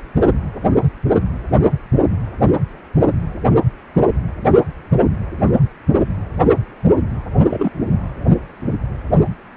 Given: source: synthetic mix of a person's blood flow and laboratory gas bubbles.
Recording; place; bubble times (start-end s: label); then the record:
Doppler ultrasound of blood flow; precordium
7.48-7.70 s: bubbles
From the record:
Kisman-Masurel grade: 112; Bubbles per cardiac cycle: 1 to 2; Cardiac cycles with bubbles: 1 to 10%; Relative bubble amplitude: moderate (0.250 to 0.450); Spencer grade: 1 (occasional bubble signal discernible with the cardiac motion signal, with majority of cardiac periods free of bubbles); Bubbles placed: anywhere in the cardiac cycle